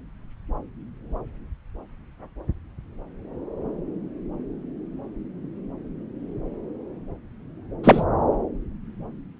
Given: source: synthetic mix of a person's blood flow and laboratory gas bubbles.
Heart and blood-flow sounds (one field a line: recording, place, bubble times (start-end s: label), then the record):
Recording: Doppler ultrasound of blood flow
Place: subclavian vein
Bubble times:
7.83-8.04 s: bubbles
From the record:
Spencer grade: 2 (many but less than half of the cardiac periods contain bubble signals, singularly or in groups)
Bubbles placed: anywhere in the cardiac cycle